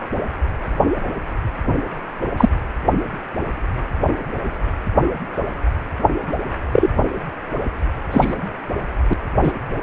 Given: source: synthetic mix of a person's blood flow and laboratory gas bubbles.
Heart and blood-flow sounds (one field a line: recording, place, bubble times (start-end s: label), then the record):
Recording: Doppler ultrasound of blood flow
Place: precordium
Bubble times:
2.37-2.50 s: bubbles
6.72-6.88 s: bubbles
8.12-8.34 s: bubbles
9.10-9.13 s: bubbles
9.43-9.53 s: bubbles
From the record:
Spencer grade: 2 (many but less than half of the cardiac periods contain bubble signals, singularly or in groups)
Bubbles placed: anywhere in the cardiac cycle